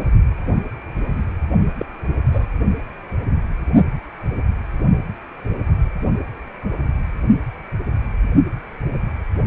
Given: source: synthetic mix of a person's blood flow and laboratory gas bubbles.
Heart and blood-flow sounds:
Doppler ultrasound of blood flow; precordium
1.77-1.85 s: bubbles
2.31-2.46 s: bubbles
From the record:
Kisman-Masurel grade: 112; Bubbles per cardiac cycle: 1 to 2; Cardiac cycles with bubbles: 1 to 10%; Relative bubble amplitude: moderate (0.250 to 0.450); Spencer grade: 1 (occasional bubble signal discernible with the cardiac motion signal, with majority of cardiac periods free of bubbles); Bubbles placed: only in the low amplitude regions of the cardiac cycle

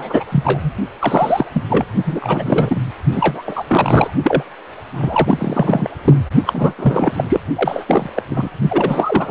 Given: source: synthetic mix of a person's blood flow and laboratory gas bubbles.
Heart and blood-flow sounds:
Doppler ultrasound of blood flow; precordium
0.00-0.23 s: bubbles
0.31-0.72 s: bubbles
1.00-1.46 s: bubbles
1.53-1.63 s: bubbles
1.69-1.85 s: bubbles
2.05-2.81 s: bubbles
3.12-3.42 s: bubbles
3.46-3.63 s: bubbles
3.67-4.10 s: bubbles
4.24-4.43 s: bubbles
4.94-5.90 s: bubbles
6.04-6.19 s: bubbles
6.46-6.73 s: bubbles
6.78-7.40 s: bubbles
7.56-8.10 s: bubbles
8.15-8.22 s: bubbles
8.30-8.50 s: bubbles
8.69-9.31 s: bubbles
From the record:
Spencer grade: 3 (all of the cardiac periods contain showers or single bubble signals, but not dominating or overriding the cardiac motion signals); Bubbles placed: only in the low amplitude regions of the cardiac cycle

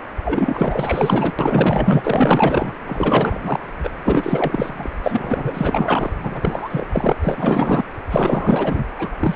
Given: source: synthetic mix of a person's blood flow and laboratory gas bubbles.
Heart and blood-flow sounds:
Doppler ultrasound of blood flow; precordium
0.24-1.32 s: bubbles
1.39-2.73 s: bubbles
2.87-3.59 s: bubbles
3.83-4.90 s: bubbles
5.02-6.11 s: bubbles
6.22-6.86 s: bubbles
6.92-7.13 s: bubbles
7.21-7.83 s: bubbles
8.11-8.84 s: bubbles
8.96-9.15 s: bubbles
9.20-9.36 s: bubbles
From the record:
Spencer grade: 4 (maximum detectable bubble signal sounding continuously throughout systole and diastole of every cardiac period, and overriding the amplitude of the normal cardiac signals); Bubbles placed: anywhere in the cardiac cycle

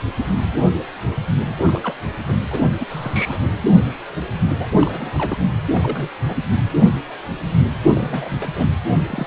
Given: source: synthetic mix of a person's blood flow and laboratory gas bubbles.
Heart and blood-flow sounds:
Doppler ultrasound of blood flow; precordium
1.47-1.55 s: bubbles
1.67-1.81 s: bubbles
1.83-1.94 s: bubbles
2.25-2.35 s: bubbles
2.50-2.69 s: bubbles
2.80-2.85 s: bubbles
2.90-3.47 s: bubbles
4.59-4.69 s: bubbles
4.78-5.37 s: bubbles
5.74-6.10 s: bubbles
6.28-6.36 s: bubbles
7.95-8.30 s: bubbles
8.39-8.49 s: bubbles
8.56-8.65 s: bubbles
8.87-9.27 s: bubbles
From the record:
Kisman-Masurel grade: 221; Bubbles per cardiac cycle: several, 3 to 8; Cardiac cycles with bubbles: 10 to 50%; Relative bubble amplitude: barely perceptible (0.100 to 0.250); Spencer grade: 2 (many but less than half of the cardiac periods contain bubble signals, singularly or in groups); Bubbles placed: anywhere in the cardiac cycle

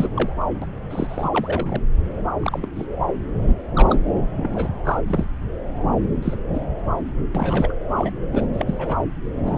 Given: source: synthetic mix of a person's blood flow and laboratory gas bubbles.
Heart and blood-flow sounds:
Doppler ultrasound of blood flow; subclavian vein
0.00-0.09 s: bubbles
0.16-0.33 s: bubbles
0.61-0.66 s: bubbles
0.90-1.28 s: bubbles
1.32-1.82 s: bubbles
2.42-2.60 s: bubbles
2.62-2.69 s: bubbles
2.76-2.85 s: bubbles
3.48-3.54 s: bubbles
3.75-4.02 s: bubbles
4.36-4.70 s: bubbles
4.84-5.01 s: bubbles
5.06-5.25 s: bubbles
6.22-6.36 s: bubbles
6.54-6.61 s: bubbles
7.34-7.74 s: bubbles
7.96-8.12 s: bubbles
8.32-8.46 s: bubbles
8.54-8.97 s: bubbles
9.46-9.58 s: bubbles
From the record:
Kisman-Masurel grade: 232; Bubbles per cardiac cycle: several, 3 to 8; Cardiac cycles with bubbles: 50 to 99%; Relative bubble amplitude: moderate (0.250 to 0.450); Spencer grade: 3 (all of the cardiac periods contain showers or single bubble signals, but not dominating or overriding the cardiac motion signals); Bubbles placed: anywhere in the cardiac cycle

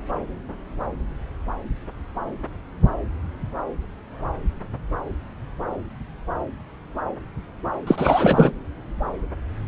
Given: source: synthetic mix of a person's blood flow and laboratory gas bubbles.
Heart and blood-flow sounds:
Doppler ultrasound of blood flow; subclavian vein
7.86-8.52 s: bubbles
From the record:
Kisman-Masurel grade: 213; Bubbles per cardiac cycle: several, 3 to 8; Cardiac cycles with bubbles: 1 to 10%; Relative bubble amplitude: loud (0.450 to 0.775); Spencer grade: 1 (occasional bubble signal discernible with the cardiac motion signal, with majority of cardiac periods free of bubbles); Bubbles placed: anywhere in the cardiac cycle

